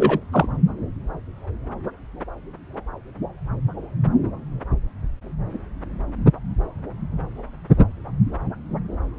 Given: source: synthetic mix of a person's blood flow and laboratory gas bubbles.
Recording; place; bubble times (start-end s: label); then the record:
Doppler ultrasound of blood flow; subclavian vein
0.00-0.19 s: bubbles
0.31-0.46 s: bubbles
From the record:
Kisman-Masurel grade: 113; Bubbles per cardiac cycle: 1 to 2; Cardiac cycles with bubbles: 1 to 10%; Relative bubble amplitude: loud (0.450 to 0.775); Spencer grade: 1 (occasional bubble signal discernible with the cardiac motion signal, with majority of cardiac periods free of bubbles); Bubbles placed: anywhere in the cardiac cycle